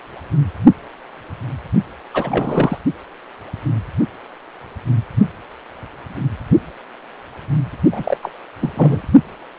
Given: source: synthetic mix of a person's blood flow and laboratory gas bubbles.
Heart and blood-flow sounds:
Doppler ultrasound of blood flow; precordium
2.13-2.78 s: bubbles
7.91-8.17 s: bubbles
8.22-8.31 s: bubbles
8.61-8.72 s: bubbles
8.75-9.01 s: bubbles
From the record:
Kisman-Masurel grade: 222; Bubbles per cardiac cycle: several, 3 to 8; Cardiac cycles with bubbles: 10 to 50%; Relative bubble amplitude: moderate (0.250 to 0.450); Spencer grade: 2 (many but less than half of the cardiac periods contain bubble signals, singularly or in groups); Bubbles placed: only in the low amplitude regions of the cardiac cycle

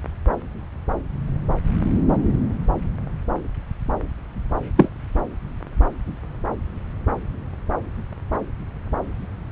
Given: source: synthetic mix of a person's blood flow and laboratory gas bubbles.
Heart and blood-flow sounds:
Doppler ultrasound of blood flow; subclavian vein
4.76-4.90 s: bubbles
From the record:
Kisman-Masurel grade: 113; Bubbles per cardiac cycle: 1 to 2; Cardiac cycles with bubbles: 1 to 10%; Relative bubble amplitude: loud (0.450 to 0.775); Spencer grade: 1 (occasional bubble signal discernible with the cardiac motion signal, with majority of cardiac periods free of bubbles); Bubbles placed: anywhere in the cardiac cycle

